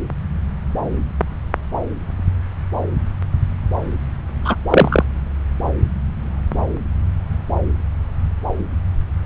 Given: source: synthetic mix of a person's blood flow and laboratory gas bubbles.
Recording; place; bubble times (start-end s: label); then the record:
Doppler ultrasound of blood flow; subclavian vein
4.44-4.56 s: bubbles
4.70-5.04 s: bubbles
From the record:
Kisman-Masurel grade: 113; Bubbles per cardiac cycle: 1 to 2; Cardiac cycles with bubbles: 1 to 10%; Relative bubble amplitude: loud (0.450 to 0.775); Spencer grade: 1 (occasional bubble signal discernible with the cardiac motion signal, with majority of cardiac periods free of bubbles); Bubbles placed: anywhere in the cardiac cycle